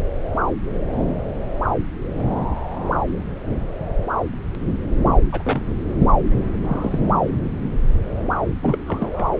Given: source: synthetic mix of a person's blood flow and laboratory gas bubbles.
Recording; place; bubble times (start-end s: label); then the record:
Doppler ultrasound of blood flow; subclavian vein
5.32-5.62 s: bubbles
6.65-7.08 s: bubbles
8.62-8.78 s: bubbles
8.87-9.30 s: bubbles
From the record:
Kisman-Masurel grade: 222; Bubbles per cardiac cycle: several, 3 to 8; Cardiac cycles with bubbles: 10 to 50%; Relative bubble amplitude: moderate (0.250 to 0.450); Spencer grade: 2 (many but less than half of the cardiac periods contain bubble signals, singularly or in groups); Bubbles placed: anywhere in the cardiac cycle